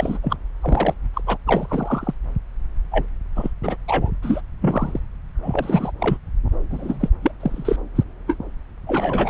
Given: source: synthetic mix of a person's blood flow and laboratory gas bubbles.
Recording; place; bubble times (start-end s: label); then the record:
Doppler ultrasound of blood flow; subclavian vein
0.00-0.18 s: bubbles
0.22-0.36 s: bubbles
0.61-0.94 s: bubbles
1.14-1.22 s: bubbles
1.26-1.37 s: bubbles
1.47-2.14 s: bubbles
2.92-3.06 s: bubbles
3.36-3.50 s: bubbles
3.63-3.77 s: bubbles
3.88-4.12 s: bubbles
4.22-4.41 s: bubbles
4.61-5.00 s: bubbles
5.42-5.92 s: bubbles
6.00-6.17 s: bubbles
6.70-6.97 s: bubbles
7.00-7.09 s: bubbles
7.23-7.31 s: bubbles
7.39-7.76 s: bubbles
7.95-8.04 s: bubbles
8.27-8.36 s: bubbles
8.87-9.30 s: bubbles
From the record:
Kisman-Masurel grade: 232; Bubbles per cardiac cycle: several, 3 to 8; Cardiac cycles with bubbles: 50 to 99%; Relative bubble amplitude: moderate (0.250 to 0.450); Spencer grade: 3 (all of the cardiac periods contain showers or single bubble signals, but not dominating or overriding the cardiac motion signals); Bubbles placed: anywhere in the cardiac cycle